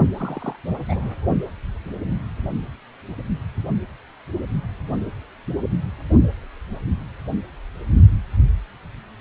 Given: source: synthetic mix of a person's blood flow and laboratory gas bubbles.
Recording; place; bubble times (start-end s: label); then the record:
Doppler ultrasound of blood flow; precordium
0.18-0.56 s: bubbles
0.88-1.09 s: bubbles
From the record:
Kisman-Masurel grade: 111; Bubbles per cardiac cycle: 1 to 2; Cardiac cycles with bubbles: 1 to 10%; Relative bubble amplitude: barely perceptible (0.100 to 0.250); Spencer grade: 1 (occasional bubble signal discernible with the cardiac motion signal, with majority of cardiac periods free of bubbles); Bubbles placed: only in the low amplitude regions of the cardiac cycle